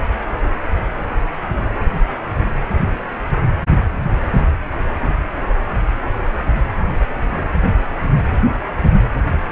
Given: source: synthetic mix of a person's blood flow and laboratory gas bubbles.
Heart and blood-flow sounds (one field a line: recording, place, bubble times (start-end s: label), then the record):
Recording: Doppler ultrasound of blood flow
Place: precordium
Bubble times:
no bubbles
From the record:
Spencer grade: 0 (complete lack of bubble signals)